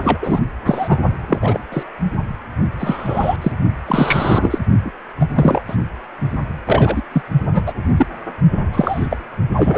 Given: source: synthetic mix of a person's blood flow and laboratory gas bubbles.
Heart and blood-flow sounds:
Doppler ultrasound of blood flow; precordium
0.05-0.19 s: bubbles
0.21-0.41 s: bubbles
0.66-0.99 s: bubbles
1.27-1.59 s: bubbles
1.72-1.83 s: bubbles
2.79-3.37 s: bubbles
3.41-3.52 s: bubbles
3.87-4.58 s: bubbles
4.84-4.91 s: bubbles
5.21-5.26 s: bubbles
5.35-5.61 s: bubbles
5.67-5.75 s: bubbles
6.65-7.03 s: bubbles
7.12-7.22 s: bubbles
7.53-7.73 s: bubbles
7.96-8.06 s: bubbles
8.72-9.07 s: bubbles
9.10-9.17 s: bubbles
9.56-9.78 s: bubbles
From the record:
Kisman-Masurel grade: 243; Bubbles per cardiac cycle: several, 3 to 8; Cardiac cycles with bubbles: 100%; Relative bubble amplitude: loud (0.450 to 0.775); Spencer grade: 3 (all of the cardiac periods contain showers or single bubble signals, but not dominating or overriding the cardiac motion signals); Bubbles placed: only in the low amplitude regions of the cardiac cycle

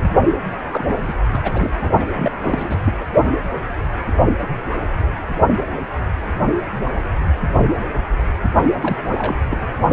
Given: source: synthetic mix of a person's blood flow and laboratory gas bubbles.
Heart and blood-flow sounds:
Doppler ultrasound of blood flow; precordium
0.00-0.11 s: bubbles
0.70-0.85 s: bubbles
0.89-1.15 s: bubbles
1.32-1.71 s: bubbles
1.81-1.90 s: bubbles
1.99-2.06 s: bubbles
2.14-2.78 s: bubbles
2.84-2.93 s: bubbles
2.99-3.06 s: bubbles
8.81-8.96 s: bubbles
9.15-9.36 s: bubbles
9.51-9.66 s: bubbles
From the record:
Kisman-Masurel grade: 332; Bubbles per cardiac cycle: rolling drumbeat, 9 or more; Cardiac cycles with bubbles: 50 to 99%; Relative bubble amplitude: moderate (0.250 to 0.450); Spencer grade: 3 (all of the cardiac periods contain showers or single bubble signals, but not dominating or overriding the cardiac motion signals); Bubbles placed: only in the low amplitude regions of the cardiac cycle

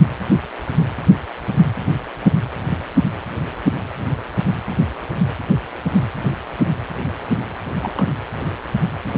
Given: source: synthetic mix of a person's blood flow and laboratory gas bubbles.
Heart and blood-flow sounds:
Doppler ultrasound of blood flow; precordium
7.81-8.11 s: bubbles
9.11-9.18 s: bubbles
From the record:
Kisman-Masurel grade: 121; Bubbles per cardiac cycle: 1 to 2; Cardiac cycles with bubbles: 10 to 50%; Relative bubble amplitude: barely perceptible (0.100 to 0.250); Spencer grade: 2 (many but less than half of the cardiac periods contain bubble signals, singularly or in groups); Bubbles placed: anywhere in the cardiac cycle

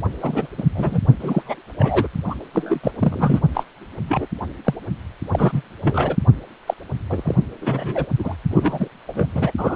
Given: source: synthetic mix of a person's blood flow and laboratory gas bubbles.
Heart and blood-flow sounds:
Doppler ultrasound of blood flow; precordium
0.22-0.47 s: bubbles
0.57-0.63 s: bubbles
0.74-1.00 s: bubbles
1.20-1.43 s: bubbles
1.45-1.61 s: bubbles
1.78-2.07 s: bubbles
2.26-2.35 s: bubbles
2.53-2.80 s: bubbles
2.83-2.92 s: bubbles
2.99-3.40 s: bubbles
3.54-3.64 s: bubbles
4.08-4.26 s: bubbles
4.64-4.74 s: bubbles
5.33-5.62 s: bubbles
5.82-6.17 s: bubbles
6.67-6.74 s: bubbles
7.09-7.35 s: bubbles
7.61-8.06 s: bubbles
8.19-8.36 s: bubbles
8.50-8.88 s: bubbles
9.07-9.27 s: bubbles
9.35-9.51 s: bubbles
9.57-9.76 s: bubbles
From the record:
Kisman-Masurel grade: 233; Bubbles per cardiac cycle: several, 3 to 8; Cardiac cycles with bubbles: 50 to 99%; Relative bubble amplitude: loud (0.450 to 0.775); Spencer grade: 3 (all of the cardiac periods contain showers or single bubble signals, but not dominating or overriding the cardiac motion signals); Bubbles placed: only in the low amplitude regions of the cardiac cycle

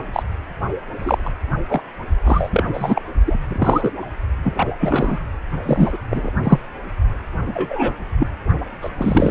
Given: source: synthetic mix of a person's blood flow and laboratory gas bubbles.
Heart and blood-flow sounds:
Doppler ultrasound of blood flow; precordium
0.13-0.23 s: bubbles
0.98-1.33 s: bubbles
1.68-1.81 s: bubbles
2.25-2.63 s: bubbles
2.73-3.02 s: bubbles
3.26-3.38 s: bubbles
3.48-3.93 s: bubbles
4.43-4.72 s: bubbles
4.80-5.22 s: bubbles
5.66-5.99 s: bubbles
6.10-6.30 s: bubbles
6.43-6.59 s: bubbles
7.47-7.94 s: bubbles
8.19-8.27 s: bubbles
8.81-8.90 s: bubbles
8.98-9.31 s: bubbles
From the record:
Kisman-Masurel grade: 243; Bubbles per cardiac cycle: several, 3 to 8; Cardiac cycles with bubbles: 100%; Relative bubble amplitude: loud (0.450 to 0.775); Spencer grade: 3 (all of the cardiac periods contain showers or single bubble signals, but not dominating or overriding the cardiac motion signals); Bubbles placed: only in the low amplitude regions of the cardiac cycle

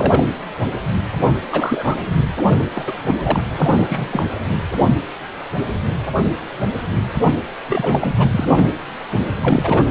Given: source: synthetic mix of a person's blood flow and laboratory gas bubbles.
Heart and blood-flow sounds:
Doppler ultrasound of blood flow; precordium
0.00-0.23 s: bubbles
1.51-1.99 s: bubbles
2.48-2.64 s: bubbles
2.74-2.93 s: bubbles
3.03-3.16 s: bubbles
3.23-3.41 s: bubbles
3.55-3.85 s: bubbles
3.88-4.26 s: bubbles
7.69-8.14 s: bubbles
8.18-8.29 s: bubbles
8.31-8.69 s: bubbles
9.37-9.84 s: bubbles
From the record:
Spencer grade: 3 (all of the cardiac periods contain showers or single bubble signals, but not dominating or overriding the cardiac motion signals); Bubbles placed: anywhere in the cardiac cycle

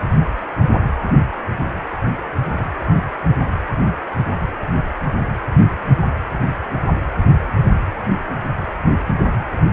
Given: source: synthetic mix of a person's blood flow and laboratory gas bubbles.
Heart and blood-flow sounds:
Doppler ultrasound of blood flow; precordium
2.12-2.21 s: bubbles
2.47-2.71 s: bubbles
From the record:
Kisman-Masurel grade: 121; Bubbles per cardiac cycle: 1 to 2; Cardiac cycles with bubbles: 10 to 50%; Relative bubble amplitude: barely perceptible (0.100 to 0.250); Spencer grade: 2 (many but less than half of the cardiac periods contain bubble signals, singularly or in groups); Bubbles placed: anywhere in the cardiac cycle

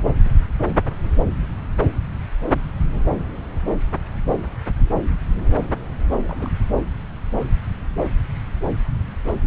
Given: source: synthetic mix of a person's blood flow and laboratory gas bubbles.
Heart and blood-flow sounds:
Doppler ultrasound of blood flow; subclavian vein
6.12-6.52 s: bubbles
From the record:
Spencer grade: 1 (occasional bubble signal discernible with the cardiac motion signal, with majority of cardiac periods free of bubbles); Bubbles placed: anywhere in the cardiac cycle

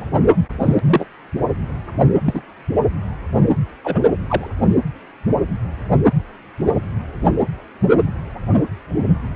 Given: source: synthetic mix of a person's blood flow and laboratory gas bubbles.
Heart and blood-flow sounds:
Doppler ultrasound of blood flow; precordium
0.60-0.79 s: bubbles
0.83-1.06 s: bubbles
2.25-2.41 s: bubbles
3.84-4.00 s: bubbles
4.28-4.47 s: bubbles
From the record:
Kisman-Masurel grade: 123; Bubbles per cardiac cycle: 1 to 2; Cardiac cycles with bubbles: 10 to 50%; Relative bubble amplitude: loud (0.450 to 0.775); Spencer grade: 2 (many but less than half of the cardiac periods contain bubble signals, singularly or in groups); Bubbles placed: anywhere in the cardiac cycle

